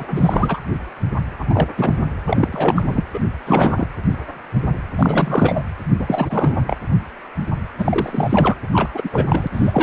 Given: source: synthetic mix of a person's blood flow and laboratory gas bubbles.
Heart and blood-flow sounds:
Doppler ultrasound of blood flow; precordium
0.00-0.05 s: bubbles
0.10-0.60 s: bubbles
1.39-1.45 s: bubbles
1.49-1.68 s: bubbles
1.77-1.94 s: bubbles
2.27-3.04 s: bubbles
3.13-3.19 s: bubbles
3.46-3.88 s: bubbles
4.98-5.65 s: bubbles
5.99-6.54 s: bubbles
6.67-6.76 s: bubbles
7.78-8.55 s: bubbles
8.73-8.89 s: bubbles
8.95-9.10 s: bubbles
9.12-9.27 s: bubbles
9.29-9.47 s: bubbles
9.53-9.83 s: bubbles
From the record:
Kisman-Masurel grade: 333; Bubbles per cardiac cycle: rolling drumbeat, 9 or more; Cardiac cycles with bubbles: 50 to 99%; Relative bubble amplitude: loud (0.450 to 0.775); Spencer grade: 3 (all of the cardiac periods contain showers or single bubble signals, but not dominating or overriding the cardiac motion signals); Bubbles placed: anywhere in the cardiac cycle

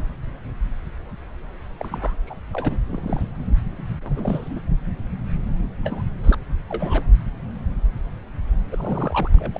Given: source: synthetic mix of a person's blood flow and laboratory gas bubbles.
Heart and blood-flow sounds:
Doppler ultrasound of blood flow; subclavian vein
1.79-2.17 s: bubbles
2.26-2.35 s: bubbles
2.53-2.80 s: bubbles
2.92-3.23 s: bubbles
4.06-4.59 s: bubbles
5.83-6.02 s: bubbles
6.24-6.35 s: bubbles
6.68-7.03 s: bubbles
8.72-9.29 s: bubbles
9.34-9.52 s: bubbles
9.54-9.60 s: bubbles
From the record:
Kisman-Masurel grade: 221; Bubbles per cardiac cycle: several, 3 to 8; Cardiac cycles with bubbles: 10 to 50%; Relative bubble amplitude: barely perceptible (0.100 to 0.250); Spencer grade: 2 (many but less than half of the cardiac periods contain bubble signals, singularly or in groups); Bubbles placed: anywhere in the cardiac cycle

